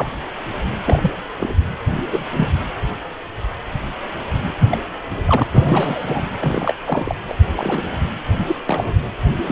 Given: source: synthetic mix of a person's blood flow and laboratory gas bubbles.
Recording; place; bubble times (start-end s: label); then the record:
Doppler ultrasound of blood flow; precordium
0.00-0.10 s: bubbles
0.86-1.11 s: bubbles
1.39-1.55 s: bubbles
2.08-2.24 s: bubbles
2.36-2.48 s: bubbles
4.43-4.51 s: bubbles
4.71-4.78 s: bubbles
5.25-5.43 s: bubbles
5.48-6.25 s: bubbles
6.39-6.75 s: bubbles
6.85-7.15 s: bubbles
7.28-7.35 s: bubbles
7.53-7.83 s: bubbles
8.47-8.55 s: bubbles
8.67-8.86 s: bubbles
9.45-9.52 s: bubbles
From the record:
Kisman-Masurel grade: 232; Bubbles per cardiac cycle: several, 3 to 8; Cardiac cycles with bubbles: 50 to 99%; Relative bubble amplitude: moderate (0.250 to 0.450); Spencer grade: 3 (all of the cardiac periods contain showers or single bubble signals, but not dominating or overriding the cardiac motion signals); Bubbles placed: anywhere in the cardiac cycle